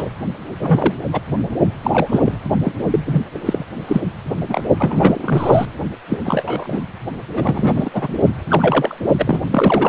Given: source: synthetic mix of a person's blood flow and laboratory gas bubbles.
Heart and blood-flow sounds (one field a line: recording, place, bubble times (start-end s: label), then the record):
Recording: Doppler ultrasound of blood flow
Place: precordium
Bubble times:
0.00-0.09 s: bubbles
0.59-0.94 s: bubbles
1.12-1.21 s: bubbles
1.83-2.38 s: bubbles
2.65-2.72 s: bubbles
2.90-3.00 s: bubbles
3.05-3.22 s: bubbles
3.34-3.39 s: bubbles
3.45-3.65 s: bubbles
3.87-4.01 s: bubbles
4.47-4.63 s: bubbles
4.79-5.65 s: bubbles
6.09-6.19 s: bubbles
6.24-6.84 s: bubbles
7.36-7.89 s: bubbles
7.93-8.15 s: bubbles
8.48-8.95 s: bubbles
9.19-9.41 s: bubbles
9.51-9.89 s: bubbles
From the record:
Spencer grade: 3 (all of the cardiac periods contain showers or single bubble signals, but not dominating or overriding the cardiac motion signals)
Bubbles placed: only in the low amplitude regions of the cardiac cycle